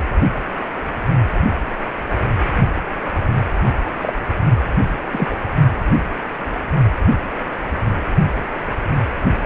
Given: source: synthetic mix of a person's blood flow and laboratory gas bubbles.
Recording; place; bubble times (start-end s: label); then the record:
Doppler ultrasound of blood flow; precordium
3.66-3.72 s: bubbles
4.02-4.15 s: bubbles
5.11-5.27 s: bubbles
5.30-5.36 s: bubbles
From the record:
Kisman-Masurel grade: 123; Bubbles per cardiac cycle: 1 to 2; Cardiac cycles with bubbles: 10 to 50%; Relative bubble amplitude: loud (0.450 to 0.775); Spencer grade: 2 (many but less than half of the cardiac periods contain bubble signals, singularly or in groups); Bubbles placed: only in the low amplitude regions of the cardiac cycle